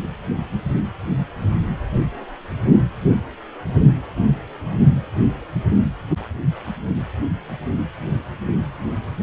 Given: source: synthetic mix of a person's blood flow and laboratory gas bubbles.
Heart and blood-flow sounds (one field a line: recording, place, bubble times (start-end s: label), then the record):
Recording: Doppler ultrasound of blood flow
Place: precordium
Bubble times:
no bubbles
From the record:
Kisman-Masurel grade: 000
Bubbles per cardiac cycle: 0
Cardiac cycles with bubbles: 0%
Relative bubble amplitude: no bubbles discernible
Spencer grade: 0 (complete lack of bubble signals)